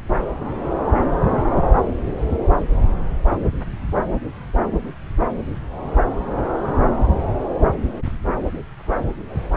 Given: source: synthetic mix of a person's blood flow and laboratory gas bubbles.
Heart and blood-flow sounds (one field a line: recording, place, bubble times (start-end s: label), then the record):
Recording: Doppler ultrasound of blood flow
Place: subclavian vein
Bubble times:
1.31-1.38 s: bubbles
From the record:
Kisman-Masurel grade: 112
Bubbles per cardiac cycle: 1 to 2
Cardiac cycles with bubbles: 1 to 10%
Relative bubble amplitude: moderate (0.250 to 0.450)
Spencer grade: 1 (occasional bubble signal discernible with the cardiac motion signal, with majority of cardiac periods free of bubbles)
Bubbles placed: anywhere in the cardiac cycle